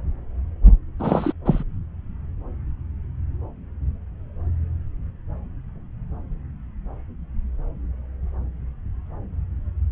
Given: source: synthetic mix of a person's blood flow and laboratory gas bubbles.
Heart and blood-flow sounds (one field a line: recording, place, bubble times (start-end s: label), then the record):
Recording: Doppler ultrasound of blood flow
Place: subclavian vein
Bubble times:
0.98-1.32 s: bubbles
1.45-1.64 s: bubbles
From the record:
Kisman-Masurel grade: 213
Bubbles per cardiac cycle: several, 3 to 8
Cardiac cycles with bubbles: 1 to 10%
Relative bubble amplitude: loud (0.450 to 0.775)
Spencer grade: 1 (occasional bubble signal discernible with the cardiac motion signal, with majority of cardiac periods free of bubbles)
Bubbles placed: anywhere in the cardiac cycle